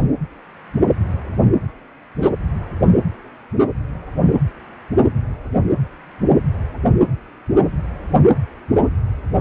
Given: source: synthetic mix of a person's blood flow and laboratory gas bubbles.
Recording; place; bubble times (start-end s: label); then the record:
Doppler ultrasound of blood flow; precordium
2.21-2.29 s: bubbles
From the record:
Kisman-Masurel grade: 113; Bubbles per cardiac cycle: 1 to 2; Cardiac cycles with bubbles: 1 to 10%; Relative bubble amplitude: loud (0.450 to 0.775); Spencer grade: 1 (occasional bubble signal discernible with the cardiac motion signal, with majority of cardiac periods free of bubbles); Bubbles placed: anywhere in the cardiac cycle